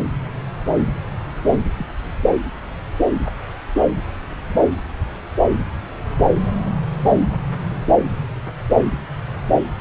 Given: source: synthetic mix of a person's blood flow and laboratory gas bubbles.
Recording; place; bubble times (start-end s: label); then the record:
Doppler ultrasound of blood flow; subclavian vein
1.47-1.58 s: bubbles
1.78-1.86 s: bubbles
From the record:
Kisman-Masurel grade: 111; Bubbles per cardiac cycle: 1 to 2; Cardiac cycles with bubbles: 1 to 10%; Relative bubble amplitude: barely perceptible (0.100 to 0.250); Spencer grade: 1 (occasional bubble signal discernible with the cardiac motion signal, with majority of cardiac periods free of bubbles); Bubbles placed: anywhere in the cardiac cycle